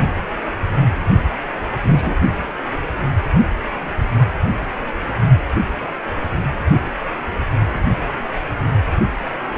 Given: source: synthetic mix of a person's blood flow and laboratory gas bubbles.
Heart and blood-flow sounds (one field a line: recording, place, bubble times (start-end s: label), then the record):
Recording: Doppler ultrasound of blood flow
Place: precordium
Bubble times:
1.83-2.15 s: bubbles
From the record:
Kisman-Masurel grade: 123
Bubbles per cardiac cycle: 1 to 2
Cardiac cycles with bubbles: 10 to 50%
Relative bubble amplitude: loud (0.450 to 0.775)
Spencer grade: 2 (many but less than half of the cardiac periods contain bubble signals, singularly or in groups)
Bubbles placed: only in the low amplitude regions of the cardiac cycle